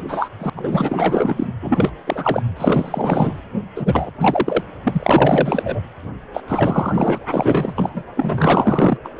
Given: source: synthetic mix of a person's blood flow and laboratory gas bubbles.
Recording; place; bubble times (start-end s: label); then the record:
Doppler ultrasound of blood flow; precordium
0.00-0.03 s: bubbles
0.08-0.29 s: bubbles
0.38-0.50 s: bubbles
0.55-1.47 s: bubbles
1.62-1.92 s: bubbles
2.06-2.43 s: bubbles
2.56-3.42 s: bubbles
3.76-4.11 s: bubbles
4.21-4.62 s: bubbles
4.84-5.80 s: bubbles
6.33-6.43 s: bubbles
6.48-7.20 s: bubbles
7.30-8.03 s: bubbles
8.16-8.97 s: bubbles
9.04-9.09 s: bubbles
9.16-9.20 s: bubbles
From the record:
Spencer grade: 4 (maximum detectable bubble signal sounding continuously throughout systole and diastole of every cardiac period, and overriding the amplitude of the normal cardiac signals); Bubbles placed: anywhere in the cardiac cycle